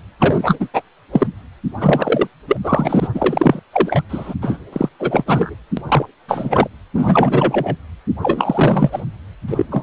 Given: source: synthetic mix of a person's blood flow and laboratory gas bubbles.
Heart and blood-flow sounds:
Doppler ultrasound of blood flow; precordium
0.18-0.57 s: bubbles
0.59-0.68 s: bubbles
0.73-0.82 s: bubbles
1.12-1.27 s: bubbles
1.80-2.27 s: bubbles
2.48-2.58 s: bubbles
2.63-3.08 s: bubbles
3.14-3.60 s: bubbles
3.72-4.01 s: bubbles
4.09-4.34 s: bubbles
4.42-4.57 s: bubbles
4.72-4.89 s: bubbles
5.00-5.54 s: bubbles
5.77-5.81 s: bubbles
5.88-6.05 s: bubbles
6.28-6.67 s: bubbles
6.94-7.76 s: bubbles
8.22-9.02 s: bubbles
9.48-9.66 s: bubbles
9.71-9.83 s: bubbles
From the record:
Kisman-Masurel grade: 343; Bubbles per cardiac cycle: rolling drumbeat, 9 or more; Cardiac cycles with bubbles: 100%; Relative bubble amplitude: loud (0.450 to 0.775); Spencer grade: 3 (all of the cardiac periods contain showers or single bubble signals, but not dominating or overriding the cardiac motion signals); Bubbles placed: anywhere in the cardiac cycle

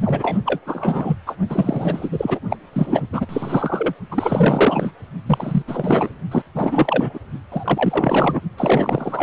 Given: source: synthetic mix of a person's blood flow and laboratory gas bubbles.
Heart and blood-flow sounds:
Doppler ultrasound of blood flow; precordium
0.05-0.39 s: bubbles
0.45-0.59 s: bubbles
0.66-1.17 s: bubbles
1.26-1.36 s: bubbles
1.49-2.09 s: bubbles
2.12-2.40 s: bubbles
2.50-2.58 s: bubbles
2.73-3.07 s: bubbles
3.12-3.26 s: bubbles
3.29-3.94 s: bubbles
4.11-4.92 s: bubbles
5.26-5.62 s: bubbles
5.67-6.10 s: bubbles
6.31-6.42 s: bubbles
6.54-7.19 s: bubbles
7.52-8.41 s: bubbles
8.58-9.23 s: bubbles
From the record:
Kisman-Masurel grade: 444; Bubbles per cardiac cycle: continuous sound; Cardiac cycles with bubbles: 100%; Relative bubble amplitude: maximal (0.775 to 0.999); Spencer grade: 4 (maximum detectable bubble signal sounding continuously throughout systole and diastole of every cardiac period, and overriding the amplitude of the normal cardiac signals); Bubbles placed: only in the low amplitude regions of the cardiac cycle

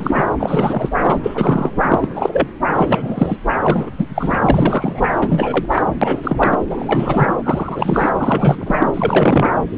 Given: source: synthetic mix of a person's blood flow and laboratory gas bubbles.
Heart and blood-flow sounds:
Doppler ultrasound of blood flow; subclavian vein
0.00-0.26 s: bubbles
0.38-0.89 s: bubbles
1.03-1.20 s: bubbles
1.23-1.71 s: bubbles
1.81-2.08 s: bubbles
2.15-2.48 s: bubbles
2.74-3.38 s: bubbles
3.63-3.90 s: bubbles
3.98-4.07 s: bubbles
4.15-4.36 s: bubbles
4.42-5.08 s: bubbles
5.21-5.66 s: bubbles
5.72-5.82 s: bubbles
5.87-5.94 s: bubbles
6.02-6.57 s: bubbles
6.70-7.33 s: bubbles
7.43-8.09 s: bubbles
8.16-8.90 s: bubbles
8.93-9.50 s: bubbles
From the record:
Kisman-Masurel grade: 343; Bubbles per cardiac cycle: rolling drumbeat, 9 or more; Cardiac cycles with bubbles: 100%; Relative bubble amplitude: loud (0.450 to 0.775); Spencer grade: 3 (all of the cardiac periods contain showers or single bubble signals, but not dominating or overriding the cardiac motion signals); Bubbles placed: anywhere in the cardiac cycle

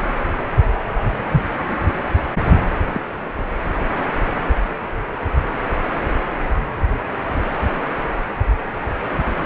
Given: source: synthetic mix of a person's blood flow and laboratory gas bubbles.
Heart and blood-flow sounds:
Doppler ultrasound of blood flow; precordium
2.92-3.00 s: bubbles
From the record:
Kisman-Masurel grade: 111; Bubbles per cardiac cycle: 1 to 2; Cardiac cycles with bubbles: 1 to 10%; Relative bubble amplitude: barely perceptible (0.100 to 0.250); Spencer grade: 1 (occasional bubble signal discernible with the cardiac motion signal, with majority of cardiac periods free of bubbles); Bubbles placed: anywhere in the cardiac cycle

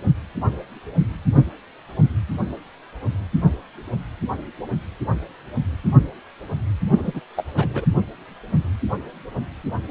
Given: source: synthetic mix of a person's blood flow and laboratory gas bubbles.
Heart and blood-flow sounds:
Doppler ultrasound of blood flow; precordium
6.92-7.21 s: bubbles
7.37-7.43 s: bubbles
7.57-7.85 s: bubbles
From the record:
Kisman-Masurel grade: 221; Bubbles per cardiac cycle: several, 3 to 8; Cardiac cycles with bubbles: 10 to 50%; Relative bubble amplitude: barely perceptible (0.100 to 0.250); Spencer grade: 2 (many but less than half of the cardiac periods contain bubble signals, singularly or in groups); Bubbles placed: anywhere in the cardiac cycle

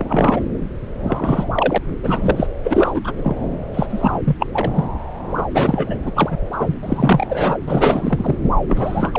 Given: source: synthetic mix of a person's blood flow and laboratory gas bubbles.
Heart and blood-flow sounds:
Doppler ultrasound of blood flow; subclavian vein
0.00-0.44 s: bubbles
1.04-1.46 s: bubbles
1.54-1.78 s: bubbles
2.03-2.47 s: bubbles
2.64-3.01 s: bubbles
3.04-3.12 s: bubbles
3.17-3.35 s: bubbles
3.74-3.87 s: bubbles
3.90-4.19 s: bubbles
4.24-4.37 s: bubbles
4.39-4.46 s: bubbles
4.53-4.71 s: bubbles
4.74-4.84 s: bubbles
5.29-5.45 s: bubbles
5.54-5.96 s: bubbles
6.01-6.12 s: bubbles
6.15-6.37 s: bubbles
6.53-6.79 s: bubbles
6.83-7.26 s: bubbles
7.29-7.57 s: bubbles
7.67-8.35 s: bubbles
8.68-9.19 s: bubbles
From the record:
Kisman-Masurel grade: 333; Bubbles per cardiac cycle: rolling drumbeat, 9 or more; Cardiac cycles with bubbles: 50 to 99%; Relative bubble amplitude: loud (0.450 to 0.775); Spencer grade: 3 (all of the cardiac periods contain showers or single bubble signals, but not dominating or overriding the cardiac motion signals); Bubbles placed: anywhere in the cardiac cycle

